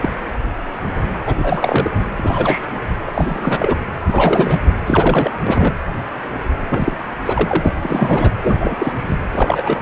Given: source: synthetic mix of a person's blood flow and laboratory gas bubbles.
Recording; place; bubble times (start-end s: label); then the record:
Doppler ultrasound of blood flow; precordium
0.00-0.10 s: bubbles
1.25-1.91 s: bubbles
2.16-2.67 s: bubbles
3.06-3.11 s: bubbles
3.14-3.79 s: bubbles
4.06-4.60 s: bubbles
4.86-5.37 s: bubbles
5.41-5.74 s: bubbles
6.69-6.96 s: bubbles
7.26-7.73 s: bubbles
7.83-8.31 s: bubbles
8.42-8.76 s: bubbles
8.79-8.93 s: bubbles
9.08-9.18 s: bubbles
9.32-9.82 s: bubbles
From the record:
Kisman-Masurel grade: 333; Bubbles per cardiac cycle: rolling drumbeat, 9 or more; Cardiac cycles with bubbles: 50 to 99%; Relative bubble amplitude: loud (0.450 to 0.775); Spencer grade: 3 (all of the cardiac periods contain showers or single bubble signals, but not dominating or overriding the cardiac motion signals); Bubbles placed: anywhere in the cardiac cycle